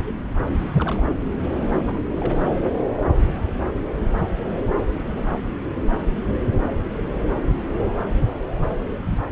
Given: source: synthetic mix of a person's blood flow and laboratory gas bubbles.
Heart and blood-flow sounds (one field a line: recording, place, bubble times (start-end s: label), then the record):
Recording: Doppler ultrasound of blood flow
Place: subclavian vein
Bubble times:
0.72-1.02 s: bubbles
1.20-1.28 s: bubbles
1.62-2.02 s: bubbles
2.18-2.42 s: bubbles
From the record:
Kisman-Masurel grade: 221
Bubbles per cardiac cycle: several, 3 to 8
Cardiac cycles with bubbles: 10 to 50%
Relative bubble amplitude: barely perceptible (0.100 to 0.250)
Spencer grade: 2 (many but less than half of the cardiac periods contain bubble signals, singularly or in groups)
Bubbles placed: anywhere in the cardiac cycle